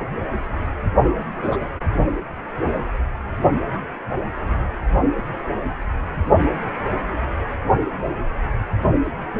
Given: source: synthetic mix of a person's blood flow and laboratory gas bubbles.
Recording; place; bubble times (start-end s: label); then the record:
Doppler ultrasound of blood flow; precordium
1.37-1.56 s: bubbles
From the record:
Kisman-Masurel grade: 112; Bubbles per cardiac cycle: 1 to 2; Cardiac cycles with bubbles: 1 to 10%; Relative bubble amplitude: moderate (0.250 to 0.450); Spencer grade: 1 (occasional bubble signal discernible with the cardiac motion signal, with majority of cardiac periods free of bubbles); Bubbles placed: only in the low amplitude regions of the cardiac cycle